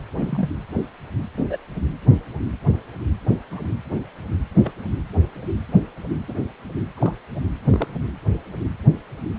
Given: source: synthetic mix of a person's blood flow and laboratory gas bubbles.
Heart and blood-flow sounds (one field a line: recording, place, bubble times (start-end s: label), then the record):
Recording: Doppler ultrasound of blood flow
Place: precordium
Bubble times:
0.17-0.48 s: bubbles
1.36-1.46 s: bubbles
1.49-1.57 s: bubbles
3.51-3.68 s: bubbles
4.63-4.72 s: bubbles
6.28-6.33 s: bubbles
6.97-7.12 s: bubbles
7.70-7.87 s: bubbles
From the record:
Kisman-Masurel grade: 121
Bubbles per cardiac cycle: 1 to 2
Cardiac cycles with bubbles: 10 to 50%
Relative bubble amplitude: barely perceptible (0.100 to 0.250)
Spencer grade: 2 (many but less than half of the cardiac periods contain bubble signals, singularly or in groups)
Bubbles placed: anywhere in the cardiac cycle